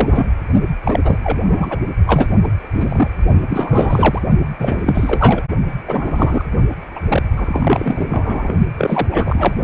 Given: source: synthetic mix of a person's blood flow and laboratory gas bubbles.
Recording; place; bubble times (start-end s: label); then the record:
Doppler ultrasound of blood flow; precordium
0.00-0.27 s: bubbles
0.84-0.99 s: bubbles
1.03-1.18 s: bubbles
1.23-1.39 s: bubbles
1.44-1.79 s: bubbles
2.06-2.27 s: bubbles
2.44-2.49 s: bubbles
2.60-3.10 s: bubbles
3.50-4.21 s: bubbles
4.59-5.45 s: bubbles
5.88-6.44 s: bubbles
6.95-7.00 s: bubbles
7.08-7.23 s: bubbles
7.36-8.53 s: bubbles
8.78-9.08 s: bubbles
9.11-9.53 s: bubbles
From the record:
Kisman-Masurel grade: 343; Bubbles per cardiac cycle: rolling drumbeat, 9 or more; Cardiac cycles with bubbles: 100%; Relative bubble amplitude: loud (0.450 to 0.775); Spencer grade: 3 (all of the cardiac periods contain showers or single bubble signals, but not dominating or overriding the cardiac motion signals); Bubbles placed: only in the low amplitude regions of the cardiac cycle